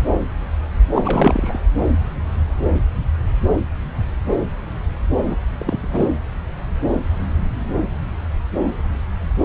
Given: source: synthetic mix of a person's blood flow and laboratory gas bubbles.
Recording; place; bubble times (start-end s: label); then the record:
Doppler ultrasound of blood flow; subclavian vein
0.93-1.59 s: bubbles
5.29-5.37 s: bubbles
5.58-6.09 s: bubbles
From the record:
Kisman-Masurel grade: 213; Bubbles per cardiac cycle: several, 3 to 8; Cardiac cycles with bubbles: 1 to 10%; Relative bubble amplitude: loud (0.450 to 0.775); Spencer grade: 1 (occasional bubble signal discernible with the cardiac motion signal, with majority of cardiac periods free of bubbles); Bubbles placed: anywhere in the cardiac cycle